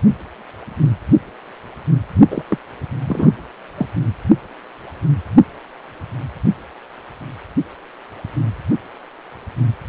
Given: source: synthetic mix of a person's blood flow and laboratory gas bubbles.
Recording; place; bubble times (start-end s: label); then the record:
Doppler ultrasound of blood flow; precordium
2.31-2.43 s: bubbles
2.48-2.58 s: bubbles
3.06-3.32 s: bubbles
3.77-3.88 s: bubbles
From the record:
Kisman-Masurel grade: 212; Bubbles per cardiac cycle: several, 3 to 8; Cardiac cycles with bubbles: 1 to 10%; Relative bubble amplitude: moderate (0.250 to 0.450); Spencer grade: 1 (occasional bubble signal discernible with the cardiac motion signal, with majority of cardiac periods free of bubbles); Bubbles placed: only in the low amplitude regions of the cardiac cycle